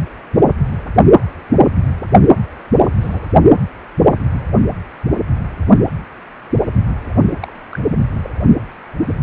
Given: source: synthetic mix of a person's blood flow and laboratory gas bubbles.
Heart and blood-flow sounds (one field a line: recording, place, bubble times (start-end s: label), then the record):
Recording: Doppler ultrasound of blood flow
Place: precordium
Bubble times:
3.00-3.19 s: bubbles
7.40-7.53 s: bubbles
7.72-7.79 s: bubbles
8.23-8.33 s: bubbles
9.04-9.10 s: bubbles
From the record:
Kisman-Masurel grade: 121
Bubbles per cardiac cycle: 1 to 2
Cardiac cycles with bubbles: 10 to 50%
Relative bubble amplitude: barely perceptible (0.100 to 0.250)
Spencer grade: 2 (many but less than half of the cardiac periods contain bubble signals, singularly or in groups)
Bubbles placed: anywhere in the cardiac cycle